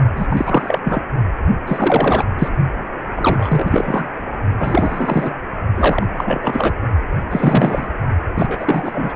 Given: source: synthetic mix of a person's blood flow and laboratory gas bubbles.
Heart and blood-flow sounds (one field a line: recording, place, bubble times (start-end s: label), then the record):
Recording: Doppler ultrasound of blood flow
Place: precordium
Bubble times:
0.16-0.80 s: bubbles
0.84-1.03 s: bubbles
1.66-2.24 s: bubbles
2.38-2.48 s: bubbles
3.15-4.07 s: bubbles
4.59-5.31 s: bubbles
5.75-6.07 s: bubbles
6.18-6.75 s: bubbles
7.30-7.87 s: bubbles
8.35-9.16 s: bubbles
From the record:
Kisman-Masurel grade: 343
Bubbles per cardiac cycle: rolling drumbeat, 9 or more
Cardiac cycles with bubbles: 100%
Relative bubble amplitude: loud (0.450 to 0.775)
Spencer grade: 3 (all of the cardiac periods contain showers or single bubble signals, but not dominating or overriding the cardiac motion signals)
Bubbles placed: only in the low amplitude regions of the cardiac cycle